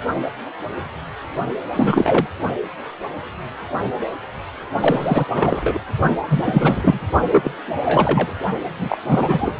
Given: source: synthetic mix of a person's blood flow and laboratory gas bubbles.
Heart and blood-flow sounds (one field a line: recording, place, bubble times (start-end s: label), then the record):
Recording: Doppler ultrasound of blood flow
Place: precordium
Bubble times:
1.75-2.27 s: bubbles
4.80-5.25 s: bubbles
5.34-5.81 s: bubbles
6.25-7.00 s: bubbles
7.32-7.51 s: bubbles
7.83-8.32 s: bubbles
8.62-8.97 s: bubbles
9.07-9.54 s: bubbles
From the record:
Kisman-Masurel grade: 333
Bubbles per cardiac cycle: rolling drumbeat, 9 or more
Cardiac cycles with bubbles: 50 to 99%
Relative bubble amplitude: loud (0.450 to 0.775)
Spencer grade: 3 (all of the cardiac periods contain showers or single bubble signals, but not dominating or overriding the cardiac motion signals)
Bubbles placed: only in the low amplitude regions of the cardiac cycle